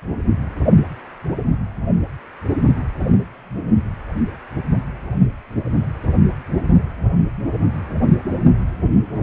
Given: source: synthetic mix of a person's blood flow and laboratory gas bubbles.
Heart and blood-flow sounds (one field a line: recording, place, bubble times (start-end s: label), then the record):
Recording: Doppler ultrasound of blood flow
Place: precordium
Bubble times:
no bubbles
From the record:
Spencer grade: 0 (complete lack of bubble signals)